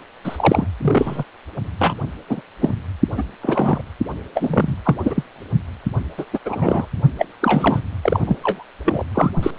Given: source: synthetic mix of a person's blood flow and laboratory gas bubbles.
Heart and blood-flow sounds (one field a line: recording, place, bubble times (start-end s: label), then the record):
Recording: Doppler ultrasound of blood flow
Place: precordium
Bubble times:
0.24-0.67 s: bubbles
0.82-1.24 s: bubbles
1.79-1.95 s: bubbles
2.28-2.41 s: bubbles
2.61-2.72 s: bubbles
3.17-3.23 s: bubbles
3.41-3.81 s: bubbles
4.34-4.76 s: bubbles
4.83-4.96 s: bubbles
5.04-5.23 s: bubbles
6.17-6.25 s: bubbles
6.33-6.39 s: bubbles
6.45-6.86 s: bubbles
7.18-7.26 s: bubbles
7.41-7.80 s: bubbles
8.02-8.20 s: bubbles
8.26-8.37 s: bubbles
8.41-8.63 s: bubbles
8.85-9.04 s: bubbles
9.14-9.30 s: bubbles
9.43-9.50 s: bubbles
From the record:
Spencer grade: 3 (all of the cardiac periods contain showers or single bubble signals, but not dominating or overriding the cardiac motion signals)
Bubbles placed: only in the low amplitude regions of the cardiac cycle